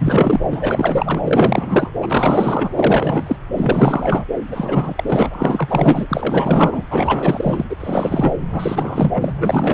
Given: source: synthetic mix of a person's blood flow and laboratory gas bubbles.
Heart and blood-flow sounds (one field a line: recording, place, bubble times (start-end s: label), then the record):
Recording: Doppler ultrasound of blood flow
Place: subclavian vein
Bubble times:
0.00-0.40 s: bubbles
0.50-1.91 s: bubbles
2.02-3.36 s: bubbles
3.54-4.24 s: bubbles
4.51-5.29 s: bubbles
5.33-6.83 s: bubbles
6.90-7.64 s: bubbles
7.69-7.76 s: bubbles
7.79-8.33 s: bubbles
8.51-9.32 s: bubbles
9.39-9.74 s: bubbles
From the record:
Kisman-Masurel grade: 444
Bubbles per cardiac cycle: continuous sound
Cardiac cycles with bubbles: 100%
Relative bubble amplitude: maximal (0.775 to 0.999)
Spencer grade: 4 (maximum detectable bubble signal sounding continuously throughout systole and diastole of every cardiac period, and overriding the amplitude of the normal cardiac signals)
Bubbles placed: anywhere in the cardiac cycle